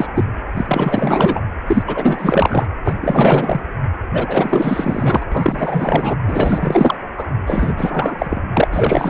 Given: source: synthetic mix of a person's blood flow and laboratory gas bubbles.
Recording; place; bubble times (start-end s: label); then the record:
Doppler ultrasound of blood flow; precordium
0.00-0.07 s: bubbles
0.15-0.25 s: bubbles
0.56-1.41 s: bubbles
1.67-1.83 s: bubbles
1.87-2.67 s: bubbles
2.85-2.94 s: bubbles
3.00-3.61 s: bubbles
4.13-5.25 s: bubbles
5.31-6.16 s: bubbles
6.28-6.96 s: bubbles
7.16-7.27 s: bubbles
7.46-8.41 s: bubbles
8.53-8.67 s: bubbles
8.71-9.10 s: bubbles
From the record:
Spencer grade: 4 (maximum detectable bubble signal sounding continuously throughout systole and diastole of every cardiac period, and overriding the amplitude of the normal cardiac signals); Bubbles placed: anywhere in the cardiac cycle